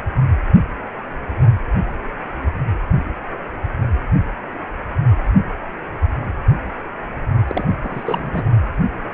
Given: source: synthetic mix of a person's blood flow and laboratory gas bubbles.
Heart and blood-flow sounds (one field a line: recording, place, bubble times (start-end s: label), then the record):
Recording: Doppler ultrasound of blood flow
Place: precordium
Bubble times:
7.47-7.63 s: bubbles
7.83-8.44 s: bubbles
From the record:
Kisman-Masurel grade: 222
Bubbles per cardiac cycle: several, 3 to 8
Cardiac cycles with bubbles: 10 to 50%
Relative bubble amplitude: moderate (0.250 to 0.450)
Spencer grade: 2 (many but less than half of the cardiac periods contain bubble signals, singularly or in groups)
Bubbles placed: only in the low amplitude regions of the cardiac cycle